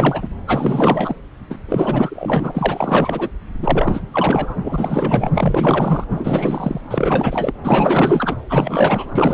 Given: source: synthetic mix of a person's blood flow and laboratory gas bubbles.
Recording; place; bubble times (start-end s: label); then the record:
Doppler ultrasound of blood flow; subclavian vein
0.00-0.28 s: bubbles
0.47-1.16 s: bubbles
1.50-1.59 s: bubbles
1.69-3.29 s: bubbles
3.61-4.01 s: bubbles
4.13-4.58 s: bubbles
4.63-5.31 s: bubbles
5.34-6.05 s: bubbles
6.10-6.81 s: bubbles
6.90-7.53 s: bubbles
7.63-8.37 s: bubbles
8.49-9.34 s: bubbles
From the record:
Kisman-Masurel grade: 444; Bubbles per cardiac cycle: continuous sound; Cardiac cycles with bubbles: 100%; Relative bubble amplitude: maximal (0.775 to 0.999); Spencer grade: 4 (maximum detectable bubble signal sounding continuously throughout systole and diastole of every cardiac period, and overriding the amplitude of the normal cardiac signals); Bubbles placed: anywhere in the cardiac cycle